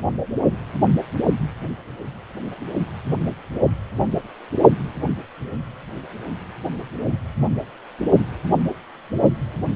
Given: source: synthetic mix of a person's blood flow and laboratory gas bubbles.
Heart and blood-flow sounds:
Doppler ultrasound of blood flow; precordium
no bubbles
From the record:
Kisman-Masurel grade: 000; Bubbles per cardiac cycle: 0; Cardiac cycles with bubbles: 0%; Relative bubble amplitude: no bubbles discernible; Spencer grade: 0 (complete lack of bubble signals)

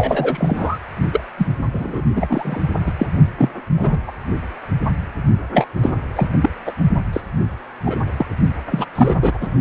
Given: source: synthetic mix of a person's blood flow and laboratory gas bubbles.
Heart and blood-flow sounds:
Doppler ultrasound of blood flow; precordium
0.00-0.78 s: bubbles
1.12-1.21 s: bubbles
1.38-1.48 s: bubbles
1.73-2.01 s: bubbles
2.15-2.62 s: bubbles
2.86-2.92 s: bubbles
2.99-3.06 s: bubbles
3.38-3.49 s: bubbles
3.77-3.98 s: bubbles
4.07-4.12 s: bubbles
5.52-5.67 s: bubbles
5.83-5.92 s: bubbles
6.16-6.27 s: bubbles
6.40-6.50 s: bubbles
6.66-6.72 s: bubbles
7.12-7.21 s: bubbles
7.85-7.96 s: bubbles
8.17-8.26 s: bubbles
8.71-8.86 s: bubbles
8.95-9.38 s: bubbles
9.41-9.48 s: bubbles
From the record:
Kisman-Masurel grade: 233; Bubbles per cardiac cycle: several, 3 to 8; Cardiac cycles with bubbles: 50 to 99%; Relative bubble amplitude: loud (0.450 to 0.775); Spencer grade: 3 (all of the cardiac periods contain showers or single bubble signals, but not dominating or overriding the cardiac motion signals); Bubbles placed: only in the low amplitude regions of the cardiac cycle

